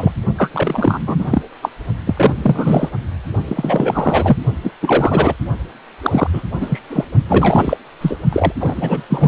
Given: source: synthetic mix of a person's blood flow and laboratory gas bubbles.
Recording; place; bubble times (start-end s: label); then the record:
Doppler ultrasound of blood flow; precordium
0.00-0.12 s: bubbles
0.38-0.50 s: bubbles
0.53-1.42 s: bubbles
1.62-1.69 s: bubbles
2.06-2.89 s: bubbles
3.48-4.38 s: bubbles
4.63-4.71 s: bubbles
4.81-5.34 s: bubbles
6.03-6.27 s: bubbles
6.33-6.41 s: bubbles
6.60-6.82 s: bubbles
6.89-7.04 s: bubbles
7.28-7.77 s: bubbles
8.01-8.16 s: bubbles
8.32-8.53 s: bubbles
8.60-9.03 s: bubbles
9.09-9.28 s: bubbles
From the record:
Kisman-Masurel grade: 343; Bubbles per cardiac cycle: rolling drumbeat, 9 or more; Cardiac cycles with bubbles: 100%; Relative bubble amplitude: loud (0.450 to 0.775); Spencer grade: 3 (all of the cardiac periods contain showers or single bubble signals, but not dominating or overriding the cardiac motion signals); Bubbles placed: only in the low amplitude regions of the cardiac cycle